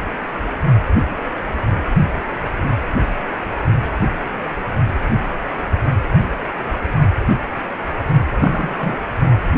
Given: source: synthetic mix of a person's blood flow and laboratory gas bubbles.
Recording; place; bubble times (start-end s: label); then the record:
Doppler ultrasound of blood flow; precordium
8.42-8.75 s: bubbles
8.79-9.01 s: bubbles
From the record:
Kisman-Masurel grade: 212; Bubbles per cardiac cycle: several, 3 to 8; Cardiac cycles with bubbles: 1 to 10%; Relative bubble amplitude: moderate (0.250 to 0.450); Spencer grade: 1 (occasional bubble signal discernible with the cardiac motion signal, with majority of cardiac periods free of bubbles); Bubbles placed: anywhere in the cardiac cycle